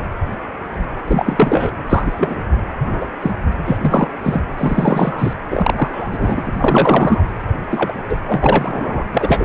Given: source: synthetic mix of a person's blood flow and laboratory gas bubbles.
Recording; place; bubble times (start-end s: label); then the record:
Doppler ultrasound of blood flow; precordium
0.00-0.03 s: bubbles
1.07-1.72 s: bubbles
1.86-2.42 s: bubbles
2.84-3.11 s: bubbles
3.20-3.31 s: bubbles
3.65-3.78 s: bubbles
3.81-4.08 s: bubbles
4.23-4.42 s: bubbles
4.58-5.33 s: bubbles
5.50-6.42 s: bubbles
6.46-7.25 s: bubbles
7.70-7.92 s: bubbles
8.09-8.17 s: bubbles
8.25-9.06 s: bubbles
9.12-9.45 s: bubbles
From the record:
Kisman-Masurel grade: 233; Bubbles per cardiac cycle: several, 3 to 8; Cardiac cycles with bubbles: 50 to 99%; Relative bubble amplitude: loud (0.450 to 0.775); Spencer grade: 3 (all of the cardiac periods contain showers or single bubble signals, but not dominating or overriding the cardiac motion signals); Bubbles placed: anywhere in the cardiac cycle